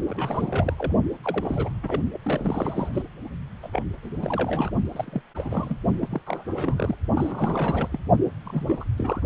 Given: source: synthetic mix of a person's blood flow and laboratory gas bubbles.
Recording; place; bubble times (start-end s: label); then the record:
Doppler ultrasound of blood flow; precordium
0.07-0.92 s: bubbles
1.23-1.69 s: bubbles
1.83-2.02 s: bubbles
2.12-2.18 s: bubbles
2.24-2.89 s: bubbles
2.93-3.02 s: bubbles
3.63-3.69 s: bubbles
3.72-3.83 s: bubbles
4.01-4.71 s: bubbles
4.92-5.21 s: bubbles
5.34-5.77 s: bubbles
6.01-6.21 s: bubbles
6.26-6.96 s: bubbles
7.14-7.88 s: bubbles
7.90-7.99 s: bubbles
8.24-8.30 s: bubbles
8.44-8.64 s: bubbles
8.68-8.84 s: bubbles
8.97-9.21 s: bubbles
From the record:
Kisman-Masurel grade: 342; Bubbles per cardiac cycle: rolling drumbeat, 9 or more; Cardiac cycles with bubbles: 100%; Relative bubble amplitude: moderate (0.250 to 0.450); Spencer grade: 3 (all of the cardiac periods contain showers or single bubble signals, but not dominating or overriding the cardiac motion signals); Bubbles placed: only in the low amplitude regions of the cardiac cycle